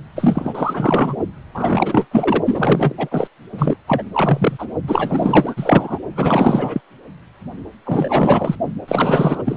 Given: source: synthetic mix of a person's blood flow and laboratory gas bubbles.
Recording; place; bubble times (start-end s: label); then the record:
Doppler ultrasound of blood flow; precordium
0.16-1.17 s: bubbles
1.54-2.08 s: bubbles
2.11-2.43 s: bubbles
2.46-3.08 s: bubbles
3.11-3.27 s: bubbles
3.52-3.76 s: bubbles
3.87-4.03 s: bubbles
4.12-4.65 s: bubbles
4.87-5.98 s: bubbles
6.15-6.80 s: bubbles
7.86-8.55 s: bubbles
8.88-9.42 s: bubbles
9.45-9.56 s: bubbles
From the record:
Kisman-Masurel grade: 444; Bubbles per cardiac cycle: continuous sound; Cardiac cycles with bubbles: 100%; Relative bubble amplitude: maximal (0.775 to 0.999); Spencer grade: 4 (maximum detectable bubble signal sounding continuously throughout systole and diastole of every cardiac period, and overriding the amplitude of the normal cardiac signals); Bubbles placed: only in the low amplitude regions of the cardiac cycle